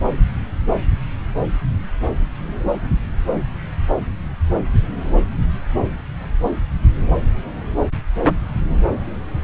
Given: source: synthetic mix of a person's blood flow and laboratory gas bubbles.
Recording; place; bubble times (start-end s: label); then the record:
Doppler ultrasound of blood flow; subclavian vein
no bubbles
From the record:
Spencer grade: 0 (complete lack of bubble signals)